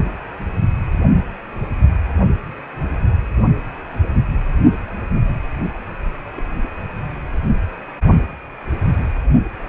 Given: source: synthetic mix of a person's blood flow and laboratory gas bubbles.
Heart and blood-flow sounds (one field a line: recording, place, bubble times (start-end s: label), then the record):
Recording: Doppler ultrasound of blood flow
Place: precordium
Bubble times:
6.36-6.42 s: bubbles
6.62-6.70 s: bubbles
From the record:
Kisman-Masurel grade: 111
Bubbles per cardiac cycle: 1 to 2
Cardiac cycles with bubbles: 1 to 10%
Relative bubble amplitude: barely perceptible (0.100 to 0.250)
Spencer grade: 1 (occasional bubble signal discernible with the cardiac motion signal, with majority of cardiac periods free of bubbles)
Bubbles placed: anywhere in the cardiac cycle